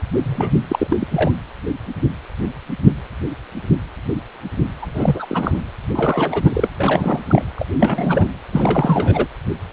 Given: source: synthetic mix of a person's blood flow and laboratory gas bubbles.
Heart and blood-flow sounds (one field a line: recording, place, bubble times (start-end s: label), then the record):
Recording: Doppler ultrasound of blood flow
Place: precordium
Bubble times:
0.22-0.64 s: bubbles
0.69-1.07 s: bubbles
1.10-1.31 s: bubbles
4.82-5.25 s: bubbles
5.29-5.62 s: bubbles
5.92-6.73 s: bubbles
6.78-7.21 s: bubbles
7.29-7.44 s: bubbles
7.56-7.66 s: bubbles
7.79-8.26 s: bubbles
8.52-9.27 s: bubbles
From the record:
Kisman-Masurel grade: 332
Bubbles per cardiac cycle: rolling drumbeat, 9 or more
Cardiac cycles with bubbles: 50 to 99%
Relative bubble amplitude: moderate (0.250 to 0.450)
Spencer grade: 3 (all of the cardiac periods contain showers or single bubble signals, but not dominating or overriding the cardiac motion signals)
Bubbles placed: anywhere in the cardiac cycle